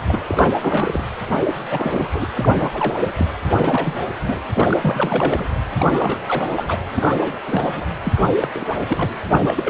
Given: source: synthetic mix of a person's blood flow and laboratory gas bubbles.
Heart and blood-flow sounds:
Doppler ultrasound of blood flow; precordium
0.00-0.02 s: bubbles
0.08-0.19 s: bubbles
0.27-1.04 s: bubbles
1.28-1.36 s: bubbles
1.46-1.54 s: bubbles
1.70-2.27 s: bubbles
2.33-2.98 s: bubbles
3.01-3.12 s: bubbles
3.16-3.27 s: bubbles
3.48-4.02 s: bubbles
4.22-4.42 s: bubbles
4.54-5.46 s: bubbles
5.77-6.21 s: bubbles
6.27-6.83 s: bubbles
6.96-7.38 s: bubbles
7.47-7.84 s: bubbles
8.04-8.13 s: bubbles
8.15-8.21 s: bubbles
8.40-8.49 s: bubbles
8.54-8.64 s: bubbles
8.87-9.09 s: bubbles
9.31-9.70 s: bubbles
From the record:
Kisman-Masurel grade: 342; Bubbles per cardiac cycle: rolling drumbeat, 9 or more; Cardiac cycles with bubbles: 100%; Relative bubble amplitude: moderate (0.250 to 0.450); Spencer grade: 3 (all of the cardiac periods contain showers or single bubble signals, but not dominating or overriding the cardiac motion signals); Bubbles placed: anywhere in the cardiac cycle

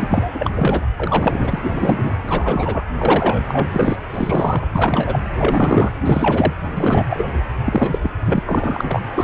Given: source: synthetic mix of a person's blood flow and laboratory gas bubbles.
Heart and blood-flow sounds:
Doppler ultrasound of blood flow; precordium
0.00-0.31 s: bubbles
0.34-0.50 s: bubbles
0.54-0.86 s: bubbles
0.98-1.59 s: bubbles
1.63-2.17 s: bubbles
2.27-2.83 s: bubbles
2.96-3.44 s: bubbles
3.47-3.96 s: bubbles
4.10-4.68 s: bubbles
4.72-5.20 s: bubbles
5.36-5.92 s: bubbles
6.05-6.53 s: bubbles
6.75-7.05 s: bubbles
7.09-7.25 s: bubbles
7.34-7.40 s: bubbles
7.64-7.98 s: bubbles
8.03-8.11 s: bubbles
8.25-8.43 s: bubbles
8.46-9.01 s: bubbles
9.14-9.24 s: bubbles
From the record:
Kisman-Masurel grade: 343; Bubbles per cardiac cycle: rolling drumbeat, 9 or more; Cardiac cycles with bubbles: 100%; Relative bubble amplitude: loud (0.450 to 0.775); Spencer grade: 3 (all of the cardiac periods contain showers or single bubble signals, but not dominating or overriding the cardiac motion signals); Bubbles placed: anywhere in the cardiac cycle

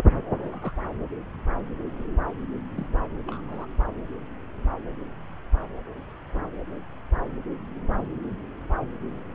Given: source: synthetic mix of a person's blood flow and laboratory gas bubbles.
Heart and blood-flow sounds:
Doppler ultrasound of blood flow; subclavian vein
0.41-0.72 s: bubbles
2.75-2.87 s: bubbles
3.27-3.43 s: bubbles
3.48-3.67 s: bubbles
From the record:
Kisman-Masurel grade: 121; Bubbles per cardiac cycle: 1 to 2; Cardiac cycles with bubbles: 10 to 50%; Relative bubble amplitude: barely perceptible (0.100 to 0.250); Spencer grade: 2 (many but less than half of the cardiac periods contain bubble signals, singularly or in groups); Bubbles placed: anywhere in the cardiac cycle

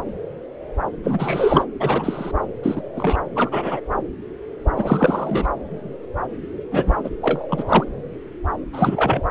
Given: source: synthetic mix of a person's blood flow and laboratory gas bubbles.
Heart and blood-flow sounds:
Doppler ultrasound of blood flow; subclavian vein
1.03-1.66 s: bubbles
1.80-2.31 s: bubbles
2.62-2.81 s: bubbles
2.95-3.19 s: bubbles
3.35-3.81 s: bubbles
4.75-5.46 s: bubbles
6.71-7.00 s: bubbles
7.04-7.09 s: bubbles
7.21-7.45 s: bubbles
7.50-7.85 s: bubbles
8.72-9.21 s: bubbles
From the record:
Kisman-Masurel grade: 233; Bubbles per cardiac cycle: several, 3 to 8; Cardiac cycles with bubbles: 50 to 99%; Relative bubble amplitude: loud (0.450 to 0.775); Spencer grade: 3 (all of the cardiac periods contain showers or single bubble signals, but not dominating or overriding the cardiac motion signals); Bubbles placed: anywhere in the cardiac cycle

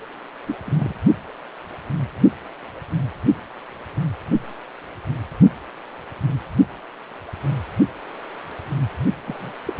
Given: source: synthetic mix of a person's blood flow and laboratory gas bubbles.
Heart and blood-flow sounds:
Doppler ultrasound of blood flow; precordium
0.46-0.56 s: bubbles
0.64-0.96 s: bubbles
9.26-9.53 s: bubbles
9.66-9.73 s: bubbles
From the record:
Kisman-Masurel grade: 121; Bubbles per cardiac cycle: 1 to 2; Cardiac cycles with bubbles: 10 to 50%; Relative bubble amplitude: barely perceptible (0.100 to 0.250); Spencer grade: 2 (many but less than half of the cardiac periods contain bubble signals, singularly or in groups); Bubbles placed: only in the low amplitude regions of the cardiac cycle

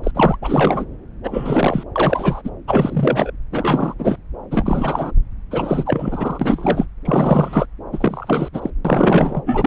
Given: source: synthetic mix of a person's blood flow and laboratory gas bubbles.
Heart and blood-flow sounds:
Doppler ultrasound of blood flow; subclavian vein
0.03-0.11 s: bubbles
0.15-0.37 s: bubbles
0.41-0.85 s: bubbles
1.23-1.83 s: bubbles
1.96-2.42 s: bubbles
2.44-2.50 s: bubbles
2.67-3.31 s: bubbles
3.52-3.94 s: bubbles
3.98-4.17 s: bubbles
4.51-5.11 s: bubbles
5.50-6.85 s: bubbles
7.05-7.67 s: bubbles
7.92-8.49 s: bubbles
8.53-8.70 s: bubbles
8.85-9.43 s: bubbles
9.46-9.67 s: bubbles
From the record:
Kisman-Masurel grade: 343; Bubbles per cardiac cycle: rolling drumbeat, 9 or more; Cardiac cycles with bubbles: 100%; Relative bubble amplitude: loud (0.450 to 0.775); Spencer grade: 3 (all of the cardiac periods contain showers or single bubble signals, but not dominating or overriding the cardiac motion signals); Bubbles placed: anywhere in the cardiac cycle

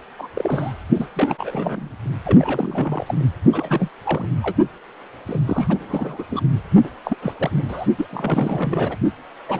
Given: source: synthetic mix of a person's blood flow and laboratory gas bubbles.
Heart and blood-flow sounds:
Doppler ultrasound of blood flow; precordium
0.18-0.28 s: bubbles
0.34-0.73 s: bubbles
0.95-1.08 s: bubbles
1.14-1.89 s: bubbles
2.24-3.04 s: bubbles
3.06-3.15 s: bubbles
3.19-3.23 s: bubbles
3.52-3.88 s: bubbles
4.02-4.29 s: bubbles
4.42-4.56 s: bubbles
5.27-6.24 s: bubbles
6.31-6.41 s: bubbles
6.83-6.90 s: bubbles
7.04-7.17 s: bubbles
7.21-7.33 s: bubbles
7.38-7.50 s: bubbles
7.55-7.64 s: bubbles
7.68-7.87 s: bubbles
7.97-8.06 s: bubbles
8.10-8.96 s: bubbles
9.48-9.60 s: bubbles
From the record:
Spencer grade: 3 (all of the cardiac periods contain showers or single bubble signals, but not dominating or overriding the cardiac motion signals); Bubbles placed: only in the low amplitude regions of the cardiac cycle

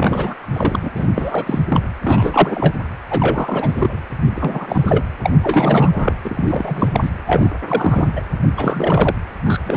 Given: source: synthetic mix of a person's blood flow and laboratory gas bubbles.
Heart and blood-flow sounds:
Doppler ultrasound of blood flow; precordium
0.00-0.35 s: bubbles
0.52-0.79 s: bubbles
0.82-0.91 s: bubbles
0.95-1.07 s: bubbles
1.15-1.62 s: bubbles
1.68-1.82 s: bubbles
2.04-2.75 s: bubbles
3.10-4.01 s: bubbles
4.25-5.04 s: bubbles
5.23-5.32 s: bubbles
5.43-6.12 s: bubbles
6.24-7.10 s: bubbles
7.27-7.50 s: bubbles
7.67-8.12 s: bubbles
8.16-8.21 s: bubbles
8.56-9.14 s: bubbles
9.44-9.61 s: bubbles
9.63-9.77 s: bubbles
From the record:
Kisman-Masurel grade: 343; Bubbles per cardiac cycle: rolling drumbeat, 9 or more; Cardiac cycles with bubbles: 100%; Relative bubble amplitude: loud (0.450 to 0.775); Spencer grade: 3 (all of the cardiac periods contain showers or single bubble signals, but not dominating or overriding the cardiac motion signals); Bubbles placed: anywhere in the cardiac cycle

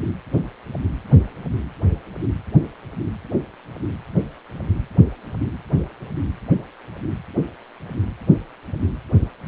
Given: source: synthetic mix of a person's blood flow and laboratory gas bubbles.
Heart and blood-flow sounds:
Doppler ultrasound of blood flow; precordium
no bubbles
From the record:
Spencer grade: 0 (complete lack of bubble signals)

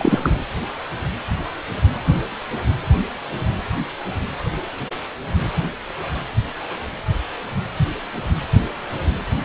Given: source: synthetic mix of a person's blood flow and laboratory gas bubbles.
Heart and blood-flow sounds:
Doppler ultrasound of blood flow; precordium
0.00-0.42 s: bubbles
From the record:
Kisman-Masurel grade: 213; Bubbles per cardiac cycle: several, 3 to 8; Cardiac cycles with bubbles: 1 to 10%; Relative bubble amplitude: loud (0.450 to 0.775); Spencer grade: 1 (occasional bubble signal discernible with the cardiac motion signal, with majority of cardiac periods free of bubbles); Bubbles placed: anywhere in the cardiac cycle

